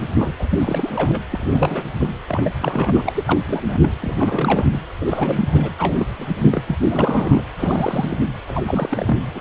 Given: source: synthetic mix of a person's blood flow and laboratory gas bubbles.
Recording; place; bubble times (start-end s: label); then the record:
Doppler ultrasound of blood flow; precordium
0.02-0.33 s: bubbles
0.39-0.48 s: bubbles
0.51-1.21 s: bubbles
1.31-1.85 s: bubbles
1.99-2.08 s: bubbles
2.27-2.51 s: bubbles
2.59-3.40 s: bubbles
3.48-3.62 s: bubbles
3.68-3.90 s: bubbles
4.02-4.65 s: bubbles
4.72-4.79 s: bubbles
5.01-5.71 s: bubbles
5.79-6.06 s: bubbles
6.19-6.37 s: bubbles
6.43-6.61 s: bubbles
6.67-6.76 s: bubbles
6.81-7.47 s: bubbles
7.59-8.18 s: bubbles
8.47-9.16 s: bubbles
9.35-9.41 s: bubbles
From the record:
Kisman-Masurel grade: 342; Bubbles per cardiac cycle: rolling drumbeat, 9 or more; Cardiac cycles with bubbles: 100%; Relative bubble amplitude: moderate (0.250 to 0.450); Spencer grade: 3 (all of the cardiac periods contain showers or single bubble signals, but not dominating or overriding the cardiac motion signals); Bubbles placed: anywhere in the cardiac cycle